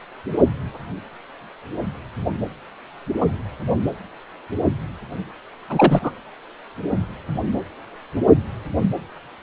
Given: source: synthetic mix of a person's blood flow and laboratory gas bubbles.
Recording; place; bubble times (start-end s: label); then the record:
Doppler ultrasound of blood flow; precordium
5.70-6.11 s: bubbles
From the record:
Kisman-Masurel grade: 212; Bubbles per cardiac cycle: several, 3 to 8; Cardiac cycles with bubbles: 1 to 10%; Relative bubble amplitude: moderate (0.250 to 0.450); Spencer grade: 1 (occasional bubble signal discernible with the cardiac motion signal, with majority of cardiac periods free of bubbles); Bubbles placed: anywhere in the cardiac cycle